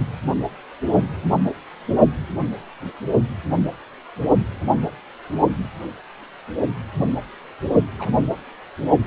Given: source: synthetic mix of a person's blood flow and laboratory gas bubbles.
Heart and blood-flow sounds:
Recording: Doppler ultrasound of blood flow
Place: precordium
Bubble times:
7.99-8.09 s: bubbles
From the record:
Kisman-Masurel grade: 121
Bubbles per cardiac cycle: 1 to 2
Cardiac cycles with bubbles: 10 to 50%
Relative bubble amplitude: barely perceptible (0.100 to 0.250)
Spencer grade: 2 (many but less than half of the cardiac periods contain bubble signals, singularly or in groups)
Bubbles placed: only in the low amplitude regions of the cardiac cycle

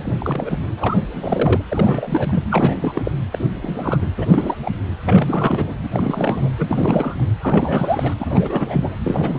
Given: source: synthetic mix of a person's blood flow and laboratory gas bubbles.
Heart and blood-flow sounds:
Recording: Doppler ultrasound of blood flow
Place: precordium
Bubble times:
0.00-0.15 s: bubbles
0.18-0.59 s: bubbles
0.77-0.98 s: bubbles
1.13-1.61 s: bubbles
1.68-2.44 s: bubbles
2.50-3.12 s: bubbles
3.31-3.44 s: bubbles
3.62-3.97 s: bubbles
4.01-4.07 s: bubbles
4.17-4.56 s: bubbles
4.63-4.71 s: bubbles
5.05-5.75 s: bubbles
5.83-5.88 s: bubbles
5.92-6.50 s: bubbles
6.58-7.27 s: bubbles
7.42-8.14 s: bubbles
8.20-8.95 s: bubbles
9.03-9.39 s: bubbles
From the record:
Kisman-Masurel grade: 342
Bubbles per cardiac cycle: rolling drumbeat, 9 or more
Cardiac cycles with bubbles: 100%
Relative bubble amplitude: moderate (0.250 to 0.450)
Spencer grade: 3 (all of the cardiac periods contain showers or single bubble signals, but not dominating or overriding the cardiac motion signals)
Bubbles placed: anywhere in the cardiac cycle

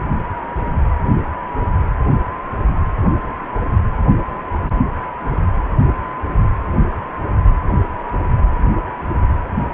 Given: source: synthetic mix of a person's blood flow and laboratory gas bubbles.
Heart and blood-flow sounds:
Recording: Doppler ultrasound of blood flow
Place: precordium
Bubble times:
no bubbles
From the record:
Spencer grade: 0 (complete lack of bubble signals)

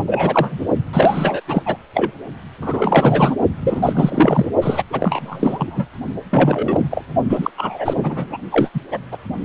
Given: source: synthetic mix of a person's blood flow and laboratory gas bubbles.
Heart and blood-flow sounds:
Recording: Doppler ultrasound of blood flow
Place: precordium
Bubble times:
0.06-0.59 s: bubbles
0.93-1.41 s: bubbles
1.48-1.63 s: bubbles
1.66-1.76 s: bubbles
1.95-2.11 s: bubbles
2.61-3.35 s: bubbles
3.61-4.48 s: bubbles
4.62-4.83 s: bubbles
4.90-5.85 s: bubbles
6.31-6.87 s: bubbles
6.90-7.04 s: bubbles
7.29-7.50 s: bubbles
7.57-8.38 s: bubbles
8.51-8.71 s: bubbles
8.74-8.80 s: bubbles
8.91-8.98 s: bubbles
9.12-9.17 s: bubbles
From the record:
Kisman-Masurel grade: 343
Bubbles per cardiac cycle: rolling drumbeat, 9 or more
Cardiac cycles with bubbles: 100%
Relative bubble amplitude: loud (0.450 to 0.775)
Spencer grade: 3 (all of the cardiac periods contain showers or single bubble signals, but not dominating or overriding the cardiac motion signals)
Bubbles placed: only in the low amplitude regions of the cardiac cycle

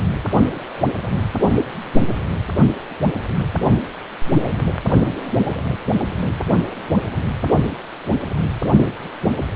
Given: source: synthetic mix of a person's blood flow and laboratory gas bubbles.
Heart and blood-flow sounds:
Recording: Doppler ultrasound of blood flow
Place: precordium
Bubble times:
0.00-0.03 s: bubbles
From the record:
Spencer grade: 2 (many but less than half of the cardiac periods contain bubble signals, singularly or in groups)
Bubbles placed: only in the low amplitude regions of the cardiac cycle

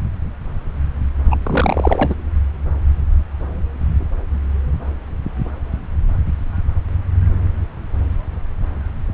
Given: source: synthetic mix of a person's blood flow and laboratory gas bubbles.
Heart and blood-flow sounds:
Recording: Doppler ultrasound of blood flow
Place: subclavian vein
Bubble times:
1.30-1.36 s: bubbles
1.43-2.15 s: bubbles
From the record:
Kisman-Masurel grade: 212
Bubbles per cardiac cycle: several, 3 to 8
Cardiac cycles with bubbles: 1 to 10%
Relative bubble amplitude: moderate (0.250 to 0.450)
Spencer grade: 1 (occasional bubble signal discernible with the cardiac motion signal, with majority of cardiac periods free of bubbles)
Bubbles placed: anywhere in the cardiac cycle

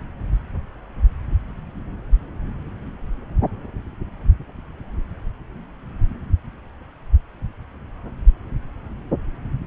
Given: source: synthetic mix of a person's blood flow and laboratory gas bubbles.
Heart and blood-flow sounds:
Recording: Doppler ultrasound of blood flow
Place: subclavian vein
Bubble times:
no bubbles
From the record:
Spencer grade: 0 (complete lack of bubble signals)

